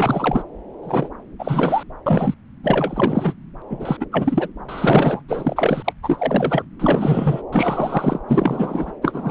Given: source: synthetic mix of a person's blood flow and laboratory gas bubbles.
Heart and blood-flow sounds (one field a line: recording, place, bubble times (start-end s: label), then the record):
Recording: Doppler ultrasound of blood flow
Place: subclavian vein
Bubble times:
0.00-0.43 s: bubbles
0.82-1.08 s: bubbles
1.39-1.83 s: bubbles
2.06-2.34 s: bubbles
2.63-3.35 s: bubbles
3.69-3.97 s: bubbles
3.99-4.06 s: bubbles
4.12-4.49 s: bubbles
4.69-5.23 s: bubbles
5.28-5.93 s: bubbles
6.03-6.65 s: bubbles
6.79-7.42 s: bubbles
7.52-8.20 s: bubbles
8.27-8.91 s: bubbles
9.01-9.31 s: bubbles
From the record:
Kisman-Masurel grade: 343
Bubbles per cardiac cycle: rolling drumbeat, 9 or more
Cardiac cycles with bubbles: 100%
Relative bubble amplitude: loud (0.450 to 0.775)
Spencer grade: 3 (all of the cardiac periods contain showers or single bubble signals, but not dominating or overriding the cardiac motion signals)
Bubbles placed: anywhere in the cardiac cycle